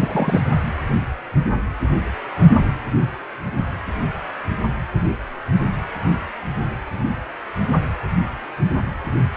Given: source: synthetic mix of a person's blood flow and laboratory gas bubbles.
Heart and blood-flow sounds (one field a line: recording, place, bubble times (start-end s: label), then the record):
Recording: Doppler ultrasound of blood flow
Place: precordium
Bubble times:
0.00-0.41 s: bubbles
From the record:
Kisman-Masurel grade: 112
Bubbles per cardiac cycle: 1 to 2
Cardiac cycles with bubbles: 1 to 10%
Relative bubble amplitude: moderate (0.250 to 0.450)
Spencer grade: 1 (occasional bubble signal discernible with the cardiac motion signal, with majority of cardiac periods free of bubbles)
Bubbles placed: anywhere in the cardiac cycle